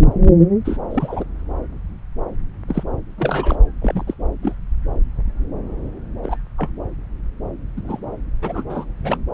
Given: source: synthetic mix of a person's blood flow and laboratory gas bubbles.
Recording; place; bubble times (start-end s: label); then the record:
Doppler ultrasound of blood flow; subclavian vein
0.65-0.78 s: bubbles
0.90-1.24 s: bubbles
2.68-2.83 s: bubbles
3.17-3.56 s: bubbles
3.81-4.04 s: bubbles
4.06-4.14 s: bubbles
4.43-4.54 s: bubbles
6.23-6.37 s: bubbles
6.57-6.69 s: bubbles
7.77-7.82 s: bubbles
7.84-8.00 s: bubbles
8.42-8.63 s: bubbles
8.70-8.86 s: bubbles
9.03-9.25 s: bubbles
From the record:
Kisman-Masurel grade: 222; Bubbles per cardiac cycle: several, 3 to 8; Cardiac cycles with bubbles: 10 to 50%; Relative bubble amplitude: moderate (0.250 to 0.450); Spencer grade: 2 (many but less than half of the cardiac periods contain bubble signals, singularly or in groups); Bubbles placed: anywhere in the cardiac cycle